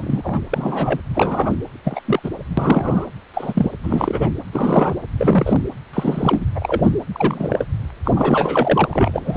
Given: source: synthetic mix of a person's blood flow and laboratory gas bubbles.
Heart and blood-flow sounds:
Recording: Doppler ultrasound of blood flow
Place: precordium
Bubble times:
0.00-0.40 s: bubbles
0.51-1.01 s: bubbles
1.15-1.57 s: bubbles
1.84-2.00 s: bubbles
2.05-2.19 s: bubbles
2.23-2.29 s: bubbles
2.57-3.06 s: bubbles
3.33-3.71 s: bubbles
3.83-4.29 s: bubbles
4.52-4.93 s: bubbles
5.18-5.62 s: bubbles
5.93-6.44 s: bubbles
6.55-6.90 s: bubbles
7.12-7.65 s: bubbles
8.05-8.86 s: bubbles
8.91-9.37 s: bubbles
From the record:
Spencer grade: 3 (all of the cardiac periods contain showers or single bubble signals, but not dominating or overriding the cardiac motion signals)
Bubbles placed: anywhere in the cardiac cycle

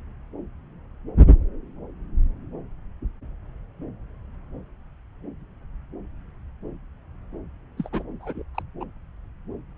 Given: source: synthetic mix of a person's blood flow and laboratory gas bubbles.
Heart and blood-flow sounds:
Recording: Doppler ultrasound of blood flow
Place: subclavian vein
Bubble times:
7.77-7.89 s: bubbles
7.93-8.03 s: bubbles
8.21-8.42 s: bubbles
8.54-8.62 s: bubbles
8.80-8.84 s: bubbles
From the record:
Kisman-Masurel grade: 211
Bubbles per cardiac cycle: several, 3 to 8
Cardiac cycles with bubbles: 1 to 10%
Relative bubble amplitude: barely perceptible (0.100 to 0.250)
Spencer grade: 1 (occasional bubble signal discernible with the cardiac motion signal, with majority of cardiac periods free of bubbles)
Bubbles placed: anywhere in the cardiac cycle

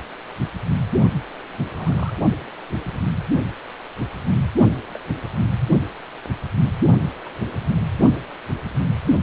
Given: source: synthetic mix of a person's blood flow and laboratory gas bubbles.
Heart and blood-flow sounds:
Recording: Doppler ultrasound of blood flow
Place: precordium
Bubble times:
1.53-2.12 s: bubbles
2.84-2.99 s: bubbles
4.93-4.99 s: bubbles
7.25-7.29 s: bubbles
From the record:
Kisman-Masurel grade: 121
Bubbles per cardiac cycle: 1 to 2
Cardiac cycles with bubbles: 10 to 50%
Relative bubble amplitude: barely perceptible (0.100 to 0.250)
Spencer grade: 2 (many but less than half of the cardiac periods contain bubble signals, singularly or in groups)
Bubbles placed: only in the low amplitude regions of the cardiac cycle

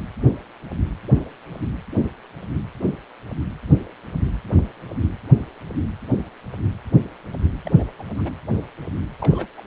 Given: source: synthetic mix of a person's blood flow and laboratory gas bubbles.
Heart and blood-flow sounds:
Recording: Doppler ultrasound of blood flow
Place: precordium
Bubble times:
7.65-7.72 s: bubbles
7.76-7.83 s: bubbles
7.98-8.04 s: bubbles
8.18-8.31 s: bubbles
9.19-9.48 s: bubbles
9.57-9.62 s: bubbles
From the record:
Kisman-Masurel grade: 221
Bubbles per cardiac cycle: several, 3 to 8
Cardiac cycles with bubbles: 10 to 50%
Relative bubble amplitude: barely perceptible (0.100 to 0.250)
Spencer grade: 2 (many but less than half of the cardiac periods contain bubble signals, singularly or in groups)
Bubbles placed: anywhere in the cardiac cycle

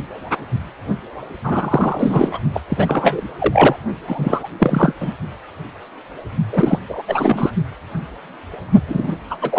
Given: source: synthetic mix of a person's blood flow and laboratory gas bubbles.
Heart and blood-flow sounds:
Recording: Doppler ultrasound of blood flow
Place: precordium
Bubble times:
1.44-2.39 s: bubbles
2.54-2.62 s: bubbles
2.69-3.27 s: bubbles
3.39-3.76 s: bubbles
4.07-4.48 s: bubbles
4.59-4.93 s: bubbles
5.00-5.12 s: bubbles
6.53-6.79 s: bubbles
6.89-7.03 s: bubbles
7.08-7.51 s: bubbles
8.88-9.15 s: bubbles
9.29-9.36 s: bubbles
9.41-9.59 s: bubbles
From the record:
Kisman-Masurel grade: 333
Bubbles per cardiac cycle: rolling drumbeat, 9 or more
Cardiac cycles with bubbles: 50 to 99%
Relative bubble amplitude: loud (0.450 to 0.775)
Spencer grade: 3 (all of the cardiac periods contain showers or single bubble signals, but not dominating or overriding the cardiac motion signals)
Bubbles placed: only in the low amplitude regions of the cardiac cycle

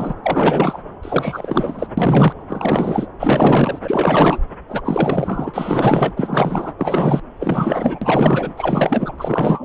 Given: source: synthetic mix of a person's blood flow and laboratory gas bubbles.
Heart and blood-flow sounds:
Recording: Doppler ultrasound of blood flow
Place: subclavian vein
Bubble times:
0.00-0.14 s: bubbles
0.23-0.83 s: bubbles
1.02-1.87 s: bubbles
1.97-2.33 s: bubbles
2.48-3.07 s: bubbles
3.19-3.79 s: bubbles
3.85-4.38 s: bubbles
4.68-4.81 s: bubbles
4.84-6.14 s: bubbles
6.17-6.72 s: bubbles
6.78-7.21 s: bubbles
7.39-7.99 s: bubbles
8.02-8.53 s: bubbles
8.56-9.13 s: bubbles
9.18-9.65 s: bubbles
From the record:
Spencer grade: 4 (maximum detectable bubble signal sounding continuously throughout systole and diastole of every cardiac period, and overriding the amplitude of the normal cardiac signals)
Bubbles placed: anywhere in the cardiac cycle

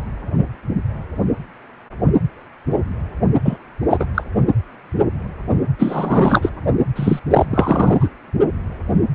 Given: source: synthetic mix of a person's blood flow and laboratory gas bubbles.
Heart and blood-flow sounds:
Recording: Doppler ultrasound of blood flow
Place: precordium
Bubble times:
3.44-3.57 s: bubbles
3.90-4.05 s: bubbles
4.14-4.24 s: bubbles
5.79-6.50 s: bubbles
6.96-7.20 s: bubbles
7.30-7.46 s: bubbles
7.51-8.09 s: bubbles
From the record:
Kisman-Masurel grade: 233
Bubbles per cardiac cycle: several, 3 to 8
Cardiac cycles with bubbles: 50 to 99%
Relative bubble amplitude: loud (0.450 to 0.775)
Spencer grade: 3 (all of the cardiac periods contain showers or single bubble signals, but not dominating or overriding the cardiac motion signals)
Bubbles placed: only in the low amplitude regions of the cardiac cycle

